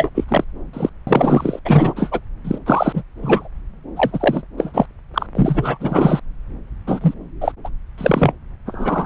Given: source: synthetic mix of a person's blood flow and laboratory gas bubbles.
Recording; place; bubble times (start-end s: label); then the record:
Doppler ultrasound of blood flow; subclavian vein
0.00-0.09 s: bubbles
0.15-0.24 s: bubbles
0.28-0.44 s: bubbles
0.73-0.90 s: bubbles
1.07-1.59 s: bubbles
1.65-2.20 s: bubbles
2.44-2.58 s: bubbles
2.66-3.03 s: bubbles
3.22-3.49 s: bubbles
3.96-4.42 s: bubbles
4.58-4.86 s: bubbles
5.14-5.27 s: bubbles
5.35-5.77 s: bubbles
5.80-6.20 s: bubbles
6.87-7.15 s: bubbles
7.41-7.52 s: bubbles
7.64-7.69 s: bubbles
7.98-8.32 s: bubbles
8.65-9.06 s: bubbles
From the record:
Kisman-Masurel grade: 343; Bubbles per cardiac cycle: rolling drumbeat, 9 or more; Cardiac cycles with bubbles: 100%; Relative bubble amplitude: loud (0.450 to 0.775); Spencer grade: 3 (all of the cardiac periods contain showers or single bubble signals, but not dominating or overriding the cardiac motion signals); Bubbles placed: anywhere in the cardiac cycle